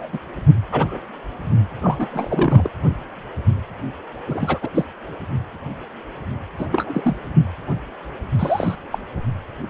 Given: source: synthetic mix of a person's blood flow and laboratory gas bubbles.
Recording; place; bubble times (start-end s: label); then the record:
Doppler ultrasound of blood flow; precordium
0.00-0.08 s: bubbles
0.12-0.19 s: bubbles
0.72-0.99 s: bubbles
1.81-2.70 s: bubbles
4.27-4.58 s: bubbles
4.62-4.69 s: bubbles
4.74-4.85 s: bubbles
6.58-6.67 s: bubbles
6.71-7.16 s: bubbles
8.39-8.75 s: bubbles
8.91-8.98 s: bubbles
From the record:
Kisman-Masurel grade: 232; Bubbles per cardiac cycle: several, 3 to 8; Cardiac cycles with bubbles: 50 to 99%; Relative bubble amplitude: moderate (0.250 to 0.450); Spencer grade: 3 (all of the cardiac periods contain showers or single bubble signals, but not dominating or overriding the cardiac motion signals); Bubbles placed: anywhere in the cardiac cycle